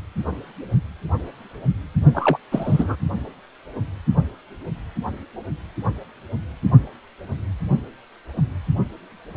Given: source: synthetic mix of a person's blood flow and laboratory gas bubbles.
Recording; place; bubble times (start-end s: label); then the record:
Doppler ultrasound of blood flow; precordium
2.14-2.38 s: bubbles
2.51-2.96 s: bubbles
From the record:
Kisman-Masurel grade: 212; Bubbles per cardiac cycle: several, 3 to 8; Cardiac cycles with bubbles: 1 to 10%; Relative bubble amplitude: moderate (0.250 to 0.450); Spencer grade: 1 (occasional bubble signal discernible with the cardiac motion signal, with majority of cardiac periods free of bubbles); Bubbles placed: only in the low amplitude regions of the cardiac cycle